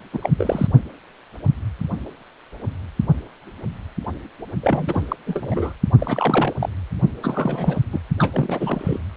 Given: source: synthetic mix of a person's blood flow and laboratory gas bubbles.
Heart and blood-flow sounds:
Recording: Doppler ultrasound of blood flow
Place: precordium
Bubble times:
0.13-0.19 s: bubbles
0.22-0.30 s: bubbles
0.38-0.67 s: bubbles
4.62-5.16 s: bubbles
5.26-5.75 s: bubbles
5.98-6.54 s: bubbles
6.59-6.69 s: bubbles
7.20-7.79 s: bubbles
7.92-8.00 s: bubbles
8.18-8.98 s: bubbles
From the record:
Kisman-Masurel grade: 332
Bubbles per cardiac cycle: rolling drumbeat, 9 or more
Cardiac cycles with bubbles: 50 to 99%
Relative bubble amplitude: moderate (0.250 to 0.450)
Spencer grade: 3 (all of the cardiac periods contain showers or single bubble signals, but not dominating or overriding the cardiac motion signals)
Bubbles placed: only in the low amplitude regions of the cardiac cycle

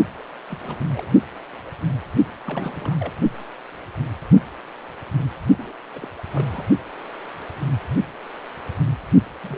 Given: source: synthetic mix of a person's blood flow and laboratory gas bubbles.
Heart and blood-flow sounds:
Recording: Doppler ultrasound of blood flow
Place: precordium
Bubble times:
0.47-0.57 s: bubbles
0.63-0.85 s: bubbles
0.92-1.11 s: bubbles
2.46-3.13 s: bubbles
5.58-5.72 s: bubbles
5.93-6.06 s: bubbles
6.29-6.65 s: bubbles
9.44-9.58 s: bubbles
From the record:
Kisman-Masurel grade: 221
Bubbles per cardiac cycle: several, 3 to 8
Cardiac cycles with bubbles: 10 to 50%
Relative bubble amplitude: barely perceptible (0.100 to 0.250)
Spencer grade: 2 (many but less than half of the cardiac periods contain bubble signals, singularly or in groups)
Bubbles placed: only in the low amplitude regions of the cardiac cycle

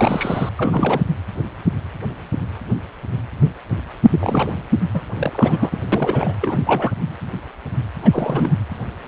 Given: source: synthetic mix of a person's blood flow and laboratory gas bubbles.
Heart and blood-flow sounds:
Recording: Doppler ultrasound of blood flow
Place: precordium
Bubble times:
0.00-0.49 s: bubbles
0.55-1.02 s: bubbles
4.09-4.62 s: bubbles
4.93-5.03 s: bubbles
5.17-5.77 s: bubbles
5.92-6.34 s: bubbles
6.41-6.59 s: bubbles
6.66-6.92 s: bubbles
8.01-8.54 s: bubbles
From the record:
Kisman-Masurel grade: 332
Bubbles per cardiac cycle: rolling drumbeat, 9 or more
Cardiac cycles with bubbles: 50 to 99%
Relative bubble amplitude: moderate (0.250 to 0.450)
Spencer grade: 3 (all of the cardiac periods contain showers or single bubble signals, but not dominating or overriding the cardiac motion signals)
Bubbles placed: anywhere in the cardiac cycle

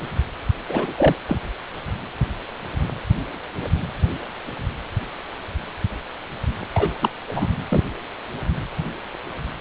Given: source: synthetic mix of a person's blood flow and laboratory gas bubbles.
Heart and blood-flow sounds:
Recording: Doppler ultrasound of blood flow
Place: precordium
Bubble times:
0.68-0.94 s: bubbles
0.97-1.16 s: bubbles
1.27-1.40 s: bubbles
6.74-7.09 s: bubbles
7.27-7.47 s: bubbles
7.70-7.83 s: bubbles
From the record:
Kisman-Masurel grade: 222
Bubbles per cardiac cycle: several, 3 to 8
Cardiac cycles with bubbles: 10 to 50%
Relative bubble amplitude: moderate (0.250 to 0.450)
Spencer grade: 2 (many but less than half of the cardiac periods contain bubble signals, singularly or in groups)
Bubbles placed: anywhere in the cardiac cycle

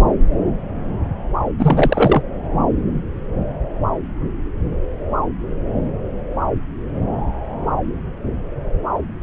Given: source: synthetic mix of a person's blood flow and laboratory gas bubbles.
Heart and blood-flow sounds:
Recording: Doppler ultrasound of blood flow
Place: subclavian vein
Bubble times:
1.58-2.21 s: bubbles
From the record:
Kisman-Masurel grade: 213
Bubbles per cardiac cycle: several, 3 to 8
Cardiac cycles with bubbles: 1 to 10%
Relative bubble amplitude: loud (0.450 to 0.775)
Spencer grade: 1 (occasional bubble signal discernible with the cardiac motion signal, with majority of cardiac periods free of bubbles)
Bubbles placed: anywhere in the cardiac cycle

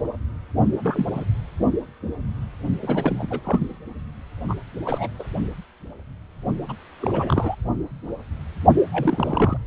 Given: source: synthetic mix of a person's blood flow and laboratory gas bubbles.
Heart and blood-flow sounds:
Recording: Doppler ultrasound of blood flow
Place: precordium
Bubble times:
0.80-1.05 s: bubbles
1.15-1.24 s: bubbles
2.82-3.27 s: bubbles
3.30-3.40 s: bubbles
3.44-3.77 s: bubbles
4.48-4.55 s: bubbles
4.85-5.08 s: bubbles
5.19-5.24 s: bubbles
6.68-6.73 s: bubbles
7.00-7.55 s: bubbles
8.92-9.57 s: bubbles
From the record:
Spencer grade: 3 (all of the cardiac periods contain showers or single bubble signals, but not dominating or overriding the cardiac motion signals)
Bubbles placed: only in the low amplitude regions of the cardiac cycle

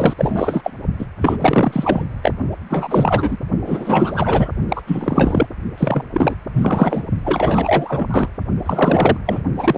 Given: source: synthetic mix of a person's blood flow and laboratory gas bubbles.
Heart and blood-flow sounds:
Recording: Doppler ultrasound of blood flow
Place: precordium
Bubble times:
0.00-0.14 s: bubbles
0.17-0.61 s: bubbles
0.64-0.71 s: bubbles
0.99-1.06 s: bubbles
1.21-2.04 s: bubbles
2.23-2.33 s: bubbles
2.69-3.38 s: bubbles
3.66-4.51 s: bubbles
4.68-4.81 s: bubbles
4.86-5.47 s: bubbles
5.77-6.03 s: bubbles
6.13-6.35 s: bubbles
6.53-7.04 s: bubbles
7.24-8.29 s: bubbles
8.63-9.17 s: bubbles
9.26-9.42 s: bubbles
9.58-9.78 s: bubbles
From the record:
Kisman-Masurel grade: 444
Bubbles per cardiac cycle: continuous sound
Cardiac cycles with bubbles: 100%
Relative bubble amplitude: maximal (0.775 to 0.999)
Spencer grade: 4 (maximum detectable bubble signal sounding continuously throughout systole and diastole of every cardiac period, and overriding the amplitude of the normal cardiac signals)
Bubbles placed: only in the low amplitude regions of the cardiac cycle

